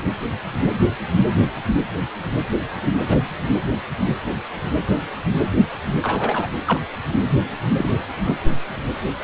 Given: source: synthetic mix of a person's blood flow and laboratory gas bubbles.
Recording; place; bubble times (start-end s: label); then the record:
Doppler ultrasound of blood flow; precordium
3.08-3.18 s: bubbles
6.02-6.48 s: bubbles
6.65-6.80 s: bubbles
7.78-8.03 s: bubbles
8.24-8.35 s: bubbles
From the record:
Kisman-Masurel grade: 122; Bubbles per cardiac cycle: 1 to 2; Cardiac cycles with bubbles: 10 to 50%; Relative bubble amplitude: moderate (0.250 to 0.450); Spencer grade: 2 (many but less than half of the cardiac periods contain bubble signals, singularly or in groups); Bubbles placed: only in the low amplitude regions of the cardiac cycle